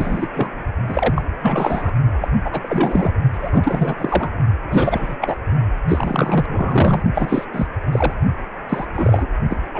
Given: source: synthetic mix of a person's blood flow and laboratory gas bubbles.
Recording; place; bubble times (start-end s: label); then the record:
Doppler ultrasound of blood flow; precordium
0.00-0.28 s: bubbles
0.34-0.48 s: bubbles
0.88-1.22 s: bubbles
1.40-1.92 s: bubbles
2.21-2.32 s: bubbles
2.45-3.15 s: bubbles
3.33-4.30 s: bubbles
4.70-5.16 s: bubbles
5.21-5.35 s: bubbles
5.88-7.03 s: bubbles
7.15-7.45 s: bubbles
7.53-7.67 s: bubbles
7.92-8.13 s: bubbles
8.69-8.85 s: bubbles
8.95-9.26 s: bubbles
9.49-9.56 s: bubbles
9.74-9.80 s: bubbles
From the record:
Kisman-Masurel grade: 342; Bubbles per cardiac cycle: rolling drumbeat, 9 or more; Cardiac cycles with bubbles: 100%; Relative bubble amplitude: moderate (0.250 to 0.450); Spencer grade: 3 (all of the cardiac periods contain showers or single bubble signals, but not dominating or overriding the cardiac motion signals); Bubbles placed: only in the low amplitude regions of the cardiac cycle